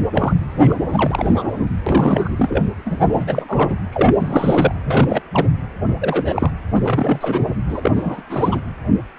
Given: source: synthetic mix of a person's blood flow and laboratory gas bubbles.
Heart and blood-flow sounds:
Doppler ultrasound of blood flow; precordium
0.13-0.35 s: bubbles
0.58-0.81 s: bubbles
0.93-1.43 s: bubbles
1.86-2.63 s: bubbles
2.85-3.75 s: bubbles
3.92-4.75 s: bubbles
4.84-5.21 s: bubbles
5.32-5.46 s: bubbles
5.88-5.95 s: bubbles
6.00-6.51 s: bubbles
6.69-7.54 s: bubbles
7.69-7.92 s: bubbles
7.96-8.21 s: bubbles
8.29-8.61 s: bubbles
From the record:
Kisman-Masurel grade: 332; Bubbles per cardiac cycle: rolling drumbeat, 9 or more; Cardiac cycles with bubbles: 50 to 99%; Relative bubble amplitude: moderate (0.250 to 0.450); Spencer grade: 3 (all of the cardiac periods contain showers or single bubble signals, but not dominating or overriding the cardiac motion signals); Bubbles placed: anywhere in the cardiac cycle

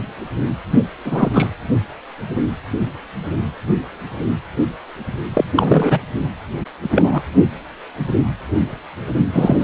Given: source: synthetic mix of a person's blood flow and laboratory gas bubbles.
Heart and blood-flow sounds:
Doppler ultrasound of blood flow; precordium
0.71-0.80 s: bubbles
1.04-1.29 s: bubbles
1.33-1.47 s: bubbles
5.33-5.45 s: bubbles
5.56-5.99 s: bubbles
6.82-7.23 s: bubbles
9.33-9.64 s: bubbles
From the record:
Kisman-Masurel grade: 223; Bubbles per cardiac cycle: several, 3 to 8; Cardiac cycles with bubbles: 10 to 50%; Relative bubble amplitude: loud (0.450 to 0.775); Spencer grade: 2 (many but less than half of the cardiac periods contain bubble signals, singularly or in groups); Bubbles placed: anywhere in the cardiac cycle

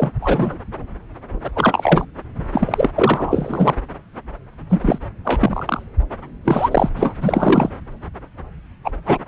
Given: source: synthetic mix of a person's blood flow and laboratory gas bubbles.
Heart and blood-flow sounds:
Doppler ultrasound of blood flow; subclavian vein
0.00-0.10 s: bubbles
0.21-0.57 s: bubbles
1.44-1.50 s: bubbles
1.56-2.05 s: bubbles
2.52-2.90 s: bubbles
2.95-3.75 s: bubbles
4.69-4.99 s: bubbles
5.25-5.83 s: bubbles
6.45-6.90 s: bubbles
6.97-7.14 s: bubbles
7.21-7.69 s: bubbles
8.84-8.91 s: bubbles
9.05-9.18 s: bubbles
From the record:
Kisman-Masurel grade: 233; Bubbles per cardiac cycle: several, 3 to 8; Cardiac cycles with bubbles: 50 to 99%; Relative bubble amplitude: loud (0.450 to 0.775); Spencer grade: 3 (all of the cardiac periods contain showers or single bubble signals, but not dominating or overriding the cardiac motion signals); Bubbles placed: anywhere in the cardiac cycle

